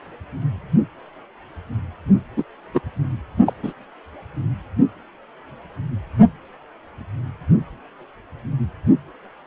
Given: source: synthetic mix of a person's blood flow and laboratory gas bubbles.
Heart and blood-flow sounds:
Doppler ultrasound of blood flow; precordium
2.36-2.44 s: bubbles
2.74-2.81 s: bubbles
3.46-3.54 s: bubbles
3.63-3.73 s: bubbles
From the record:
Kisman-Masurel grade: 123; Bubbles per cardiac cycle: 1 to 2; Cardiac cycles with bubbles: 10 to 50%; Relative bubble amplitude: loud (0.450 to 0.775); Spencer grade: 2 (many but less than half of the cardiac periods contain bubble signals, singularly or in groups); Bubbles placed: anywhere in the cardiac cycle

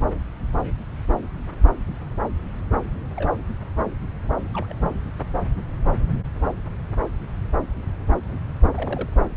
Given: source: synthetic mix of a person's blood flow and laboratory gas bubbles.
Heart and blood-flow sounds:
Doppler ultrasound of blood flow; subclavian vein
3.16-3.36 s: bubbles
4.54-4.75 s: bubbles
4.82-4.90 s: bubbles
8.76-9.09 s: bubbles
From the record:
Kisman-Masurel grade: 121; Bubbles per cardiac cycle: 1 to 2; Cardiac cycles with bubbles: 10 to 50%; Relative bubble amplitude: barely perceptible (0.100 to 0.250); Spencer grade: 2 (many but less than half of the cardiac periods contain bubble signals, singularly or in groups); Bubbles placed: anywhere in the cardiac cycle

